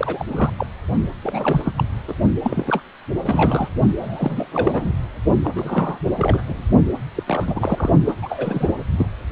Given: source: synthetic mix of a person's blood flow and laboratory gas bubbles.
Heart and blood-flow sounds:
Doppler ultrasound of blood flow; precordium
0.00-0.24 s: bubbles
0.30-0.50 s: bubbles
0.58-0.67 s: bubbles
1.23-1.73 s: bubbles
1.77-1.84 s: bubbles
2.08-2.15 s: bubbles
2.43-2.82 s: bubbles
3.23-3.69 s: bubbles
4.00-4.99 s: bubbles
5.44-5.49 s: bubbles
5.55-5.98 s: bubbles
6.17-6.42 s: bubbles
6.47-6.63 s: bubbles
7.15-7.23 s: bubbles
7.27-7.90 s: bubbles
8.05-8.13 s: bubbles
8.22-8.73 s: bubbles
8.98-9.06 s: bubbles
From the record:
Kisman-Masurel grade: 342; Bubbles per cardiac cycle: rolling drumbeat, 9 or more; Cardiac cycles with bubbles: 100%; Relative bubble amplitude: moderate (0.250 to 0.450); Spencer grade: 3 (all of the cardiac periods contain showers or single bubble signals, but not dominating or overriding the cardiac motion signals); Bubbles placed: only in the low amplitude regions of the cardiac cycle

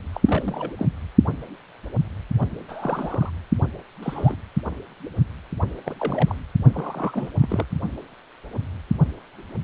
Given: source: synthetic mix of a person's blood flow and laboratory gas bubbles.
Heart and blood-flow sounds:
Doppler ultrasound of blood flow; precordium
0.12-0.20 s: bubbles
0.26-0.72 s: bubbles
0.77-0.86 s: bubbles
2.39-2.48 s: bubbles
2.68-3.31 s: bubbles
4.03-4.36 s: bubbles
5.84-5.94 s: bubbles
5.98-6.35 s: bubbles
6.72-7.31 s: bubbles
7.42-7.66 s: bubbles
From the record:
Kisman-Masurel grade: 221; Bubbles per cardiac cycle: several, 3 to 8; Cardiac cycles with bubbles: 10 to 50%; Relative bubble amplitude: barely perceptible (0.100 to 0.250); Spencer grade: 2 (many but less than half of the cardiac periods contain bubble signals, singularly or in groups); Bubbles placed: anywhere in the cardiac cycle

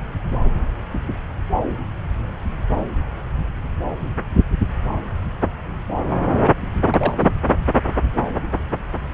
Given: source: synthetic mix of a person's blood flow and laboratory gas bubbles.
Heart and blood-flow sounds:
Doppler ultrasound of blood flow; subclavian vein
6.90-7.13 s: bubbles
7.17-7.31 s: bubbles
From the record:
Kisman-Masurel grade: 212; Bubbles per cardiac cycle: several, 3 to 8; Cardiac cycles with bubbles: 1 to 10%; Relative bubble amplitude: moderate (0.250 to 0.450); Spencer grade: 1 (occasional bubble signal discernible with the cardiac motion signal, with majority of cardiac periods free of bubbles); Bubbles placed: anywhere in the cardiac cycle

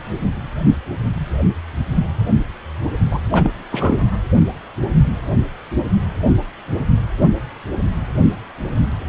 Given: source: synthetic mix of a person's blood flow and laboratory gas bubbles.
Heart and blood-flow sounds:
Doppler ultrasound of blood flow; precordium
3.10-3.19 s: bubbles
3.31-3.50 s: bubbles
3.71-4.00 s: bubbles
From the record:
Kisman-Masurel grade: 212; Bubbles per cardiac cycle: several, 3 to 8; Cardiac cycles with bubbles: 1 to 10%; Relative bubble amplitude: moderate (0.250 to 0.450); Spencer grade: 1 (occasional bubble signal discernible with the cardiac motion signal, with majority of cardiac periods free of bubbles); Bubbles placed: only in the low amplitude regions of the cardiac cycle

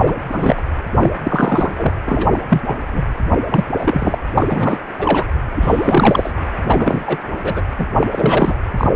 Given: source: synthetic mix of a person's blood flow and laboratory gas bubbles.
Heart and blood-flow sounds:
Doppler ultrasound of blood flow; precordium
0.00-0.15 s: bubbles
0.29-0.62 s: bubbles
0.99-1.15 s: bubbles
1.23-1.94 s: bubbles
2.06-2.38 s: bubbles
2.48-2.62 s: bubbles
2.67-3.04 s: bubbles
3.51-3.63 s: bubbles
3.77-4.17 s: bubbles
4.35-4.82 s: bubbles
4.98-5.26 s: bubbles
5.55-6.33 s: bubbles
6.64-7.18 s: bubbles
7.42-7.62 s: bubbles
7.78-7.87 s: bubbles
7.96-8.54 s: bubbles
8.77-8.90 s: bubbles
From the record:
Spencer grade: 3 (all of the cardiac periods contain showers or single bubble signals, but not dominating or overriding the cardiac motion signals); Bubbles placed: anywhere in the cardiac cycle

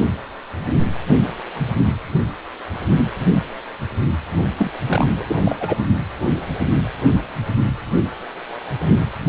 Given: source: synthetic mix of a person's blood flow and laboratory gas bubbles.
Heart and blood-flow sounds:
Doppler ultrasound of blood flow; precordium
4.57-4.71 s: bubbles
4.87-5.08 s: bubbles
5.19-5.23 s: bubbles
5.28-5.36 s: bubbles
5.45-5.78 s: bubbles
From the record:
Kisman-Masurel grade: 212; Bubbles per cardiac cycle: several, 3 to 8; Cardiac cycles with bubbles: 1 to 10%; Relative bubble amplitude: moderate (0.250 to 0.450); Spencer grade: 1 (occasional bubble signal discernible with the cardiac motion signal, with majority of cardiac periods free of bubbles); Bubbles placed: only in the low amplitude regions of the cardiac cycle

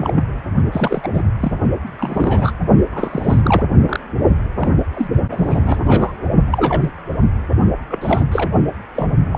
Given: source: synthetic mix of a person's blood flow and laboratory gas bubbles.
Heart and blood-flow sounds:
Doppler ultrasound of blood flow; precordium
0.00-0.21 s: bubbles
0.72-1.09 s: bubbles
1.13-1.23 s: bubbles
1.40-1.52 s: bubbles
1.98-2.52 s: bubbles
2.92-3.63 s: bubbles
3.85-4.00 s: bubbles
4.55-4.69 s: bubbles
4.93-5.07 s: bubbles
5.30-5.81 s: bubbles
5.84-6.12 s: bubbles
6.50-6.89 s: bubbles
7.88-8.25 s: bubbles
8.32-8.51 s: bubbles
8.95-9.11 s: bubbles
9.32-9.38 s: bubbles
From the record:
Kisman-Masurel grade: 242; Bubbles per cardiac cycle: several, 3 to 8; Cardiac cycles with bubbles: 100%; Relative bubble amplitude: moderate (0.250 to 0.450); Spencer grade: 3 (all of the cardiac periods contain showers or single bubble signals, but not dominating or overriding the cardiac motion signals); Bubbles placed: only in the low amplitude regions of the cardiac cycle

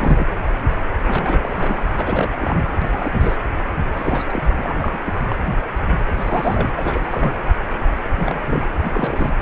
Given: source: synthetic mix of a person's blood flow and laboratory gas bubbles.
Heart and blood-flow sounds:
Doppler ultrasound of blood flow; precordium
0.00-0.27 s: bubbles
1.05-1.85 s: bubbles
1.95-2.31 s: bubbles
2.35-2.77 s: bubbles
2.81-3.37 s: bubbles
3.92-4.42 s: bubbles
4.57-4.97 s: bubbles
5.05-5.14 s: bubbles
5.21-5.35 s: bubbles
6.17-6.73 s: bubbles
6.77-7.33 s: bubbles
8.14-8.63 s: bubbles
8.80-9.32 s: bubbles
From the record:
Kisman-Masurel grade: 332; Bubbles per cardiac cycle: rolling drumbeat, 9 or more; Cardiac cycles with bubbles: 50 to 99%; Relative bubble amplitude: moderate (0.250 to 0.450); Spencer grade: 3 (all of the cardiac periods contain showers or single bubble signals, but not dominating or overriding the cardiac motion signals); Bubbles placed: anywhere in the cardiac cycle

